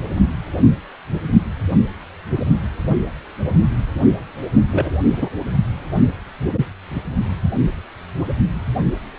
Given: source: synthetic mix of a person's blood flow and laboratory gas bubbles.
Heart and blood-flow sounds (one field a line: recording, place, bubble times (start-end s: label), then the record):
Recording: Doppler ultrasound of blood flow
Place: precordium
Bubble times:
4.71-4.90 s: bubbles
5.16-5.29 s: bubbles
From the record:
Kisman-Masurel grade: 123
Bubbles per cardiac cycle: 1 to 2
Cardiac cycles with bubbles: 10 to 50%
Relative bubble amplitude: loud (0.450 to 0.775)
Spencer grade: 2 (many but less than half of the cardiac periods contain bubble signals, singularly or in groups)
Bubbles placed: only in the low amplitude regions of the cardiac cycle